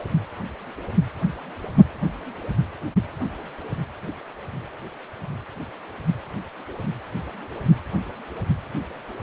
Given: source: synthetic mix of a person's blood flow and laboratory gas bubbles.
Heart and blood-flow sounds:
Doppler ultrasound of blood flow; precordium
no bubbles
From the record:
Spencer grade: 0 (complete lack of bubble signals)

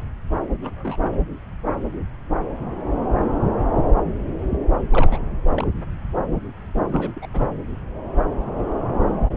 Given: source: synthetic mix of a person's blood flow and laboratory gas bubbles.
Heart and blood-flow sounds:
Doppler ultrasound of blood flow; subclavian vein
0.61-0.98 s: bubbles
1.03-1.17 s: bubbles
4.91-5.18 s: bubbles
5.54-5.68 s: bubbles
6.87-7.12 s: bubbles
7.16-7.27 s: bubbles
7.33-7.48 s: bubbles
From the record:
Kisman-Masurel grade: 221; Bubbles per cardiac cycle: several, 3 to 8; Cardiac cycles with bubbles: 10 to 50%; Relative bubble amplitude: barely perceptible (0.100 to 0.250); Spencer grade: 2 (many but less than half of the cardiac periods contain bubble signals, singularly or in groups); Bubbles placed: anywhere in the cardiac cycle

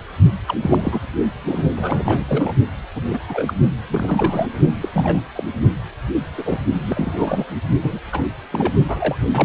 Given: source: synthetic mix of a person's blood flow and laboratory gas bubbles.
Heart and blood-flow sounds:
Doppler ultrasound of blood flow; precordium
0.47-0.57 s: bubbles
0.59-1.00 s: bubbles
1.46-1.66 s: bubbles
1.76-2.23 s: bubbles
2.28-2.53 s: bubbles
2.95-3.02 s: bubbles
3.09-3.54 s: bubbles
3.88-4.49 s: bubbles
4.81-4.89 s: bubbles
4.92-5.22 s: bubbles
5.36-5.44 s: bubbles
6.37-6.60 s: bubbles
6.72-7.45 s: bubbles
7.81-8.00 s: bubbles
8.12-8.24 s: bubbles
8.50-8.73 s: bubbles
8.88-9.16 s: bubbles
9.29-9.45 s: bubbles
From the record:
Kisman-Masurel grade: 242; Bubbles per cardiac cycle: several, 3 to 8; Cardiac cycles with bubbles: 100%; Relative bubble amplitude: moderate (0.250 to 0.450); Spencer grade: 3 (all of the cardiac periods contain showers or single bubble signals, but not dominating or overriding the cardiac motion signals); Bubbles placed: only in the low amplitude regions of the cardiac cycle

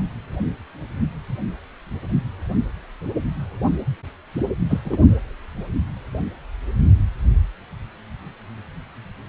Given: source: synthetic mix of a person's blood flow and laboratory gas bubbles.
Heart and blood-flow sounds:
Doppler ultrasound of blood flow; precordium
4.71-4.79 s: bubbles
4.84-4.98 s: bubbles
From the record:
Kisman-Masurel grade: 112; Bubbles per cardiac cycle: 1 to 2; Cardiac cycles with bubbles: 1 to 10%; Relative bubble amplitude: moderate (0.250 to 0.450); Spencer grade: 1 (occasional bubble signal discernible with the cardiac motion signal, with majority of cardiac periods free of bubbles); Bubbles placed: only in the low amplitude regions of the cardiac cycle

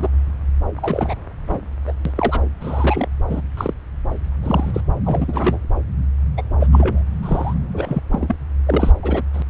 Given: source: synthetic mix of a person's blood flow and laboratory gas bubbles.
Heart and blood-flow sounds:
Doppler ultrasound of blood flow; subclavian vein
0.00-0.09 s: bubbles
0.76-1.15 s: bubbles
1.48-1.58 s: bubbles
1.87-1.93 s: bubbles
2.05-2.42 s: bubbles
2.60-3.08 s: bubbles
3.30-3.41 s: bubbles
3.57-3.74 s: bubbles
4.42-4.71 s: bubbles
4.74-4.81 s: bubbles
5.04-5.59 s: bubbles
6.37-6.42 s: bubbles
6.59-6.67 s: bubbles
6.71-7.02 s: bubbles
7.23-7.54 s: bubbles
7.73-8.01 s: bubbles
8.11-8.35 s: bubbles
8.66-8.91 s: bubbles
9.02-9.22 s: bubbles
9.33-9.42 s: bubbles
From the record:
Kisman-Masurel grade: 242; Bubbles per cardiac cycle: several, 3 to 8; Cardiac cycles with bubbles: 100%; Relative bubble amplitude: moderate (0.250 to 0.450); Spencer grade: 3 (all of the cardiac periods contain showers or single bubble signals, but not dominating or overriding the cardiac motion signals); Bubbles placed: anywhere in the cardiac cycle

